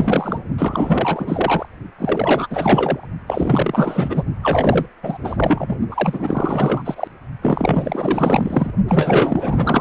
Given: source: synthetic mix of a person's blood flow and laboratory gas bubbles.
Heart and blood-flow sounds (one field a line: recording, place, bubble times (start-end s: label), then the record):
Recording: Doppler ultrasound of blood flow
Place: precordium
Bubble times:
0.00-0.40 s: bubbles
0.58-1.66 s: bubbles
1.99-3.07 s: bubbles
3.27-4.23 s: bubbles
4.42-4.86 s: bubbles
5.02-5.17 s: bubbles
5.23-5.77 s: bubbles
5.90-6.82 s: bubbles
6.84-7.08 s: bubbles
7.42-8.71 s: bubbles
8.88-9.81 s: bubbles
From the record:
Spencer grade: 4 (maximum detectable bubble signal sounding continuously throughout systole and diastole of every cardiac period, and overriding the amplitude of the normal cardiac signals)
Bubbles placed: only in the low amplitude regions of the cardiac cycle